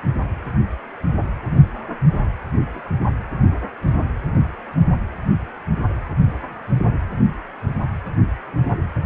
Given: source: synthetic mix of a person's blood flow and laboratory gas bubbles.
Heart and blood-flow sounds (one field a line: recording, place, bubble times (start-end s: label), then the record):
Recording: Doppler ultrasound of blood flow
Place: precordium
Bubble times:
2.74-2.81 s: bubbles
From the record:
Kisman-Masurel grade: 111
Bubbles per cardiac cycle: 1 to 2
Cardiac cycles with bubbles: 1 to 10%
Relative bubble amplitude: barely perceptible (0.100 to 0.250)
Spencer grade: 1 (occasional bubble signal discernible with the cardiac motion signal, with majority of cardiac periods free of bubbles)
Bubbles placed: anywhere in the cardiac cycle